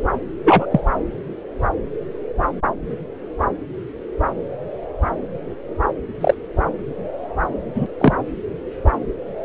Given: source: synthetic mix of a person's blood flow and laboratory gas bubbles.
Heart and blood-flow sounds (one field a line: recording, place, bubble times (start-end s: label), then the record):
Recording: Doppler ultrasound of blood flow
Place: subclavian vein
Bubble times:
0.44-0.66 s: bubbles
0.70-0.80 s: bubbles
6.21-6.34 s: bubbles
7.75-7.87 s: bubbles
8.00-8.13 s: bubbles
From the record:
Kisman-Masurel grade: 123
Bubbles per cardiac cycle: 1 to 2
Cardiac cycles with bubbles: 10 to 50%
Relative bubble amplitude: loud (0.450 to 0.775)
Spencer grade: 2 (many but less than half of the cardiac periods contain bubble signals, singularly or in groups)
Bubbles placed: anywhere in the cardiac cycle